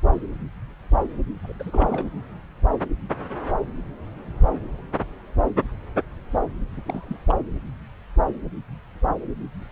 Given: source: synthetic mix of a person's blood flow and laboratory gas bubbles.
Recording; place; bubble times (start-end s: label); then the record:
Doppler ultrasound of blood flow; subclavian vein
1.44-1.53 s: bubbles
1.59-2.06 s: bubbles
6.85-7.35 s: bubbles
From the record:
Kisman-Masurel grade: 221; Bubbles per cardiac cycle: several, 3 to 8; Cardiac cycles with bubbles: 10 to 50%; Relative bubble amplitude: barely perceptible (0.100 to 0.250); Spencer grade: 2 (many but less than half of the cardiac periods contain bubble signals, singularly or in groups); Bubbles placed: anywhere in the cardiac cycle